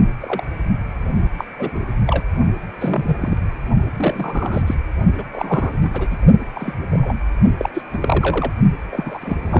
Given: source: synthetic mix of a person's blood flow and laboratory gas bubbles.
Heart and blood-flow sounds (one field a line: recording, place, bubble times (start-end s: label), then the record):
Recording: Doppler ultrasound of blood flow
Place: precordium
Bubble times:
0.20-0.43 s: bubbles
1.38-1.44 s: bubbles
1.58-1.82 s: bubbles
2.07-2.24 s: bubbles
2.78-3.17 s: bubbles
3.20-3.38 s: bubbles
3.97-4.63 s: bubbles
4.66-4.75 s: bubbles
5.18-5.24 s: bubbles
5.33-5.71 s: bubbles
5.81-6.08 s: bubbles
6.11-6.18 s: bubbles
6.55-6.74 s: bubbles
6.91-7.13 s: bubbles
7.57-7.70 s: bubbles
7.74-7.82 s: bubbles
7.92-8.51 s: bubbles
8.91-9.60 s: bubbles
From the record:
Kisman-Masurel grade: 232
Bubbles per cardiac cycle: several, 3 to 8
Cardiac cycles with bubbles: 50 to 99%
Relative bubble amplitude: moderate (0.250 to 0.450)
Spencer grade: 3 (all of the cardiac periods contain showers or single bubble signals, but not dominating or overriding the cardiac motion signals)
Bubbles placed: only in the low amplitude regions of the cardiac cycle